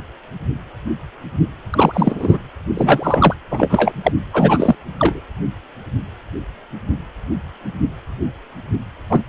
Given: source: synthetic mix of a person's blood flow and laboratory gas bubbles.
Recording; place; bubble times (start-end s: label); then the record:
Doppler ultrasound of blood flow; precordium
1.70-2.38 s: bubbles
2.73-3.34 s: bubbles
3.50-3.92 s: bubbles
4.04-4.12 s: bubbles
4.33-4.75 s: bubbles
4.99-5.20 s: bubbles
9.08-9.21 s: bubbles
From the record:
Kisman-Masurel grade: 223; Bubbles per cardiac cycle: several, 3 to 8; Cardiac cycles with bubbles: 10 to 50%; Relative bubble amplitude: loud (0.450 to 0.775); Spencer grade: 2 (many but less than half of the cardiac periods contain bubble signals, singularly or in groups); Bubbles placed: anywhere in the cardiac cycle